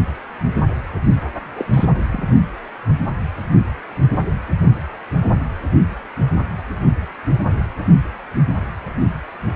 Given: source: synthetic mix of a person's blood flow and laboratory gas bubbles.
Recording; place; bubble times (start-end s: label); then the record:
Doppler ultrasound of blood flow; precordium
1.56-1.66 s: bubbles
1.74-1.86 s: bubbles
2.10-2.23 s: bubbles
From the record:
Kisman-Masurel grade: 212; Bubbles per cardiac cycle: several, 3 to 8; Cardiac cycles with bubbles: 1 to 10%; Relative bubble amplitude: moderate (0.250 to 0.450); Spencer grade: 1 (occasional bubble signal discernible with the cardiac motion signal, with majority of cardiac periods free of bubbles); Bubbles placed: only in the low amplitude regions of the cardiac cycle